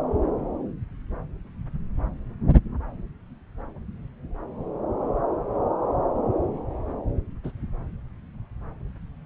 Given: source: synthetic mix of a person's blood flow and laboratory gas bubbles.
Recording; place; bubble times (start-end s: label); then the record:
Doppler ultrasound of blood flow; subclavian vein
7.44-7.52 s: bubbles
From the record:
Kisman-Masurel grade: 112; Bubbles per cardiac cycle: 1 to 2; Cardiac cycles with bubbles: 1 to 10%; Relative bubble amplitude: moderate (0.250 to 0.450); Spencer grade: 1 (occasional bubble signal discernible with the cardiac motion signal, with majority of cardiac periods free of bubbles); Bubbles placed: anywhere in the cardiac cycle